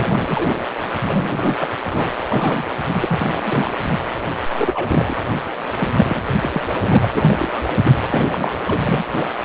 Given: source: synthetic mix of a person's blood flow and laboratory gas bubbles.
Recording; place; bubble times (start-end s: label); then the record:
Doppler ultrasound of blood flow; precordium
0.00-0.67 s: bubbles
1.04-1.75 s: bubbles
1.92-2.14 s: bubbles
2.26-2.64 s: bubbles
2.93-3.73 s: bubbles
4.58-5.20 s: bubbles
5.77-5.88 s: bubbles
5.98-6.33 s: bubbles
6.41-6.49 s: bubbles
6.52-6.66 s: bubbles
6.84-7.61 s: bubbles
7.67-7.77 s: bubbles
7.84-7.92 s: bubbles
8.10-8.58 s: bubbles
8.67-9.04 s: bubbles
9.16-9.34 s: bubbles
9.43-9.45 s: bubbles
From the record:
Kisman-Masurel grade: 342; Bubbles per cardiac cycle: rolling drumbeat, 9 or more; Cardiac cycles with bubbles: 100%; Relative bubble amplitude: moderate (0.250 to 0.450); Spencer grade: 3 (all of the cardiac periods contain showers or single bubble signals, but not dominating or overriding the cardiac motion signals); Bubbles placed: anywhere in the cardiac cycle